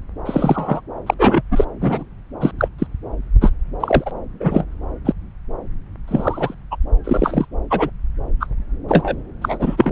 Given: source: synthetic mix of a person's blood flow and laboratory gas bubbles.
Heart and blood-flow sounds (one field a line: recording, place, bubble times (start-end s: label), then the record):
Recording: Doppler ultrasound of blood flow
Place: subclavian vein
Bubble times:
0.26-0.80 s: bubbles
1.06-1.14 s: bubbles
1.19-1.42 s: bubbles
1.50-1.65 s: bubbles
1.80-2.04 s: bubbles
2.40-2.52 s: bubbles
2.58-2.69 s: bubbles
2.79-2.86 s: bubbles
3.41-3.52 s: bubbles
3.80-4.11 s: bubbles
4.40-4.66 s: bubbles
5.05-5.12 s: bubbles
6.08-6.55 s: bubbles
6.71-6.77 s: bubbles
7.04-7.46 s: bubbles
7.70-7.90 s: bubbles
8.39-8.47 s: bubbles
8.88-9.15 s: bubbles
9.41-9.92 s: bubbles
From the record:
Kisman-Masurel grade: 233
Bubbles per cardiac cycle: several, 3 to 8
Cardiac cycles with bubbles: 50 to 99%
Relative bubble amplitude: loud (0.450 to 0.775)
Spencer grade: 3 (all of the cardiac periods contain showers or single bubble signals, but not dominating or overriding the cardiac motion signals)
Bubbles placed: anywhere in the cardiac cycle